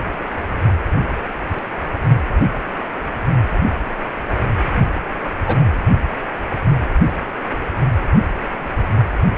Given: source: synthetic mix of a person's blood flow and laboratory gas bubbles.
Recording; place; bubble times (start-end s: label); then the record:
Doppler ultrasound of blood flow; precordium
5.46-5.58 s: bubbles
From the record:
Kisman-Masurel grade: 113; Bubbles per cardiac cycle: 1 to 2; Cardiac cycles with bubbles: 1 to 10%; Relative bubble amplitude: loud (0.450 to 0.775); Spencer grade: 1 (occasional bubble signal discernible with the cardiac motion signal, with majority of cardiac periods free of bubbles); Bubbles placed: anywhere in the cardiac cycle